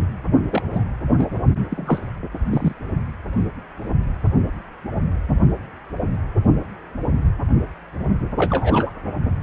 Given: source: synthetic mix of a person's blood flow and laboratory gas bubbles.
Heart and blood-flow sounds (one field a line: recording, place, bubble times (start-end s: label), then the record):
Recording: Doppler ultrasound of blood flow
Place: precordium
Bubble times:
0.52-0.62 s: bubbles
0.72-0.83 s: bubbles
1.18-1.27 s: bubbles
1.71-2.00 s: bubbles
2.50-2.73 s: bubbles
8.37-8.90 s: bubbles
From the record:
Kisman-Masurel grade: 222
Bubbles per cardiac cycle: several, 3 to 8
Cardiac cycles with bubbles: 10 to 50%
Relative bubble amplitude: moderate (0.250 to 0.450)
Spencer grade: 2 (many but less than half of the cardiac periods contain bubble signals, singularly or in groups)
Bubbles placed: only in the low amplitude regions of the cardiac cycle